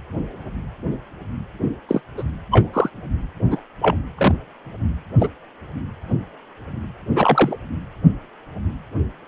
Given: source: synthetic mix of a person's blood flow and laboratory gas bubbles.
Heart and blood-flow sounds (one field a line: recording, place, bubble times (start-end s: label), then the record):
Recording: Doppler ultrasound of blood flow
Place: precordium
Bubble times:
1.88-2.00 s: bubbles
2.17-2.23 s: bubbles
2.51-2.69 s: bubbles
2.73-2.90 s: bubbles
3.50-3.61 s: bubbles
3.81-3.97 s: bubbles
4.18-4.35 s: bubbles
5.18-5.28 s: bubbles
7.16-7.57 s: bubbles
From the record:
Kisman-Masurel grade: 123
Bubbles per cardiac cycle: 1 to 2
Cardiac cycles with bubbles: 10 to 50%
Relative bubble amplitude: loud (0.450 to 0.775)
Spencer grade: 2 (many but less than half of the cardiac periods contain bubble signals, singularly or in groups)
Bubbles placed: anywhere in the cardiac cycle